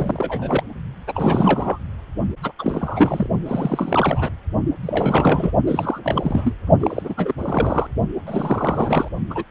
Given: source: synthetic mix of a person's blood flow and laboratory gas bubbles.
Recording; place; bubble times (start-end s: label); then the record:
Doppler ultrasound of blood flow; precordium
0.00-0.63 s: bubbles
1.07-1.78 s: bubbles
2.42-2.51 s: bubbles
2.58-3.28 s: bubbles
3.46-4.29 s: bubbles
4.82-5.51 s: bubbles
5.67-6.00 s: bubbles
6.03-6.54 s: bubbles
6.80-7.14 s: bubbles
7.17-7.34 s: bubbles
7.38-7.87 s: bubbles
8.26-9.09 s: bubbles
9.30-9.44 s: bubbles
From the record:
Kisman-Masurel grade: 342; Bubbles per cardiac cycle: rolling drumbeat, 9 or more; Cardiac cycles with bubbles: 100%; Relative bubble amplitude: moderate (0.250 to 0.450); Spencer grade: 3 (all of the cardiac periods contain showers or single bubble signals, but not dominating or overriding the cardiac motion signals); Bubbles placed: only in the low amplitude regions of the cardiac cycle